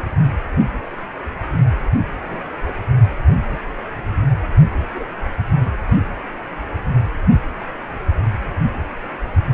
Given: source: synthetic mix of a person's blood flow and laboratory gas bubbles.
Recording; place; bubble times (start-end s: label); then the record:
Doppler ultrasound of blood flow; precordium
2.23-2.52 s: bubbles
2.60-2.72 s: bubbles
3.50-3.58 s: bubbles
4.94-5.05 s: bubbles
5.65-5.69 s: bubbles
From the record:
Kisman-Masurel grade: 121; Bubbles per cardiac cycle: 1 to 2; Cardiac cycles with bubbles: 10 to 50%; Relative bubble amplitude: barely perceptible (0.100 to 0.250); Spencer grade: 2 (many but less than half of the cardiac periods contain bubble signals, singularly or in groups); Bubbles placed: anywhere in the cardiac cycle